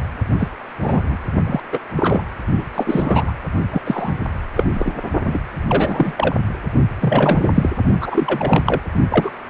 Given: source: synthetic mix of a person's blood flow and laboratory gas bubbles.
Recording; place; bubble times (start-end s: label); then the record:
Doppler ultrasound of blood flow; precordium
0.38-0.49 s: bubbles
0.81-1.18 s: bubbles
1.46-1.60 s: bubbles
1.72-1.79 s: bubbles
1.96-2.21 s: bubbles
2.58-2.64 s: bubbles
2.74-3.33 s: bubbles
3.71-3.82 s: bubbles
3.84-4.15 s: bubbles
4.54-4.63 s: bubbles
4.75-4.93 s: bubbles
5.25-5.40 s: bubbles
5.67-6.13 s: bubbles
6.17-6.34 s: bubbles
7.00-7.51 s: bubbles
7.54-7.70 s: bubbles
8.01-8.82 s: bubbles
9.10-9.30 s: bubbles
From the record:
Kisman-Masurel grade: 243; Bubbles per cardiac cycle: several, 3 to 8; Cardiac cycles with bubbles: 100%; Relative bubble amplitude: loud (0.450 to 0.775); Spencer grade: 3 (all of the cardiac periods contain showers or single bubble signals, but not dominating or overriding the cardiac motion signals); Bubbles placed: only in the low amplitude regions of the cardiac cycle